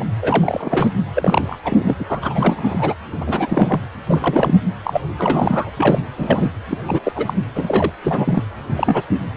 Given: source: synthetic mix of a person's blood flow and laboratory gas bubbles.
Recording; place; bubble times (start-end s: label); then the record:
Doppler ultrasound of blood flow; precordium
0.00-0.05 s: bubbles
0.22-0.89 s: bubbles
1.15-1.58 s: bubbles
1.64-1.96 s: bubbles
1.99-2.04 s: bubbles
2.08-2.95 s: bubbles
3.12-3.17 s: bubbles
3.21-3.80 s: bubbles
4.08-4.54 s: bubbles
4.83-5.01 s: bubbles
5.17-5.71 s: bubbles
5.76-5.99 s: bubbles
6.17-6.50 s: bubbles
6.69-6.78 s: bubbles
6.87-7.01 s: bubbles
7.03-7.12 s: bubbles
7.15-7.33 s: bubbles
7.55-7.91 s: bubbles
8.04-8.43 s: bubbles
8.75-9.03 s: bubbles
From the record:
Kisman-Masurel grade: 343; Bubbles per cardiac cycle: rolling drumbeat, 9 or more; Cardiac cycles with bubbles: 100%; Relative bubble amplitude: loud (0.450 to 0.775); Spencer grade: 3 (all of the cardiac periods contain showers or single bubble signals, but not dominating or overriding the cardiac motion signals); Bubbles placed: anywhere in the cardiac cycle